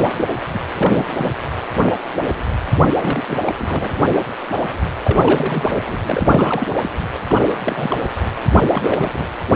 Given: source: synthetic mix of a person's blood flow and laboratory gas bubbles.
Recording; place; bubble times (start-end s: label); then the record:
Doppler ultrasound of blood flow; precordium
0.17-0.30 s: bubbles
0.54-0.59 s: bubbles
0.76-1.29 s: bubbles
2.81-2.94 s: bubbles
2.99-3.23 s: bubbles
3.27-3.38 s: bubbles
3.46-3.53 s: bubbles
3.57-3.90 s: bubbles
5.03-5.98 s: bubbles
6.05-6.67 s: bubbles
6.82-6.90 s: bubbles
7.29-7.48 s: bubbles
7.65-7.96 s: bubbles
8.55-8.66 s: bubbles
8.70-9.11 s: bubbles
9.13-9.29 s: bubbles
From the record:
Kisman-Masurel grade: 332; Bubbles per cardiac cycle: rolling drumbeat, 9 or more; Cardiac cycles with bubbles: 50 to 99%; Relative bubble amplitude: moderate (0.250 to 0.450); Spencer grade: 3 (all of the cardiac periods contain showers or single bubble signals, but not dominating or overriding the cardiac motion signals); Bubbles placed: anywhere in the cardiac cycle